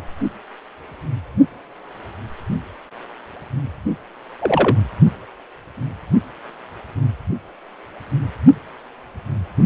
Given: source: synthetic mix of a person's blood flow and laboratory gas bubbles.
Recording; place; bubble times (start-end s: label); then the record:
Doppler ultrasound of blood flow; precordium
4.41-4.76 s: bubbles
From the record:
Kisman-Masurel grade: 113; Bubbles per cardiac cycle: 1 to 2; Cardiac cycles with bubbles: 1 to 10%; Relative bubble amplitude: loud (0.450 to 0.775); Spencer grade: 1 (occasional bubble signal discernible with the cardiac motion signal, with majority of cardiac periods free of bubbles); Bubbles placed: only in the low amplitude regions of the cardiac cycle